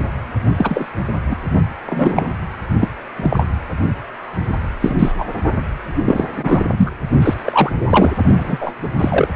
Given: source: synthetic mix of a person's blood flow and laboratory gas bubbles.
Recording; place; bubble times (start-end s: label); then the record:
Doppler ultrasound of blood flow; precordium
0.57-0.86 s: bubbles
1.28-1.35 s: bubbles
1.86-2.32 s: bubbles
2.79-2.88 s: bubbles
3.16-3.46 s: bubbles
4.80-5.12 s: bubbles
5.18-5.25 s: bubbles
5.96-6.28 s: bubbles
6.35-6.64 s: bubbles
6.77-6.92 s: bubbles
7.21-7.34 s: bubbles
7.45-7.72 s: bubbles
7.89-8.12 s: bubbles
8.37-8.58 s: bubbles
8.61-8.71 s: bubbles
8.82-8.88 s: bubbles
8.99-9.28 s: bubbles
From the record:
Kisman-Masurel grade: 233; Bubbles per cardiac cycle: several, 3 to 8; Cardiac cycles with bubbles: 50 to 99%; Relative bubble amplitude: loud (0.450 to 0.775); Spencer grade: 3 (all of the cardiac periods contain showers or single bubble signals, but not dominating or overriding the cardiac motion signals); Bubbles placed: anywhere in the cardiac cycle